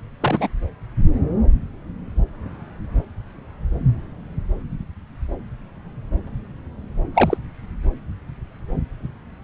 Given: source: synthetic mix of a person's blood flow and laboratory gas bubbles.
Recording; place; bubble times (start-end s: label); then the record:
Doppler ultrasound of blood flow; subclavian vein
0.21-0.49 s: bubbles
7.15-7.37 s: bubbles
From the record:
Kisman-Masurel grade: 212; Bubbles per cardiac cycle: several, 3 to 8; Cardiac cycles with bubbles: 1 to 10%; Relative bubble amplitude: moderate (0.250 to 0.450); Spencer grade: 1 (occasional bubble signal discernible with the cardiac motion signal, with majority of cardiac periods free of bubbles); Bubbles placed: anywhere in the cardiac cycle